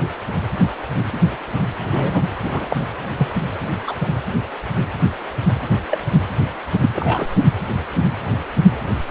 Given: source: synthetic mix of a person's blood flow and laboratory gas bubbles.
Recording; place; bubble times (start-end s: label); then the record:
Doppler ultrasound of blood flow; precordium
1.91-2.25 s: bubbles
2.44-2.76 s: bubbles
3.18-3.34 s: bubbles
3.87-3.95 s: bubbles
5.91-5.98 s: bubbles
6.81-6.90 s: bubbles
6.95-7.28 s: bubbles
From the record:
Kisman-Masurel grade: 122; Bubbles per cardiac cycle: 1 to 2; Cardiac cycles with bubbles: 10 to 50%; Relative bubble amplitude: moderate (0.250 to 0.450); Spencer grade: 2 (many but less than half of the cardiac periods contain bubble signals, singularly or in groups); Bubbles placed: anywhere in the cardiac cycle